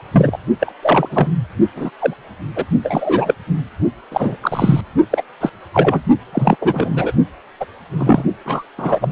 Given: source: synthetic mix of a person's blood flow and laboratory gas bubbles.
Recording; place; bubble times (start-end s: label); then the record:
Doppler ultrasound of blood flow; precordium
0.11-0.38 s: bubbles
0.60-0.72 s: bubbles
0.83-1.08 s: bubbles
1.10-1.29 s: bubbles
1.75-1.90 s: bubbles
2.00-2.14 s: bubbles
2.55-2.66 s: bubbles
2.82-3.35 s: bubbles
4.11-4.36 s: bubbles
4.42-4.81 s: bubbles
5.10-5.22 s: bubbles
5.40-5.50 s: bubbles
5.73-6.01 s: bubbles
6.32-6.56 s: bubbles
6.61-7.12 s: bubbles
7.60-7.65 s: bubbles
7.97-8.24 s: bubbles
8.46-8.63 s: bubbles
8.78-9.12 s: bubbles
From the record:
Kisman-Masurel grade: 243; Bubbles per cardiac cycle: several, 3 to 8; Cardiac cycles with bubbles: 100%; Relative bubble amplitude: loud (0.450 to 0.775); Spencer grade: 3 (all of the cardiac periods contain showers or single bubble signals, but not dominating or overriding the cardiac motion signals); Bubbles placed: only in the low amplitude regions of the cardiac cycle